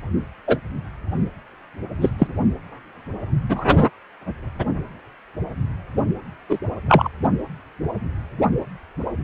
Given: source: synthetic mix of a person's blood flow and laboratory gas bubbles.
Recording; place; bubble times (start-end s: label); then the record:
Doppler ultrasound of blood flow; precordium
0.47-0.57 s: bubbles
2.00-2.10 s: bubbles
2.18-2.27 s: bubbles
3.48-3.65 s: bubbles
6.49-6.58 s: bubbles
6.88-7.09 s: bubbles
From the record:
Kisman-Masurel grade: 123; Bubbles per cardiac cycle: 1 to 2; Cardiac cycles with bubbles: 10 to 50%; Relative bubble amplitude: loud (0.450 to 0.775); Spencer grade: 2 (many but less than half of the cardiac periods contain bubble signals, singularly or in groups); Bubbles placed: only in the low amplitude regions of the cardiac cycle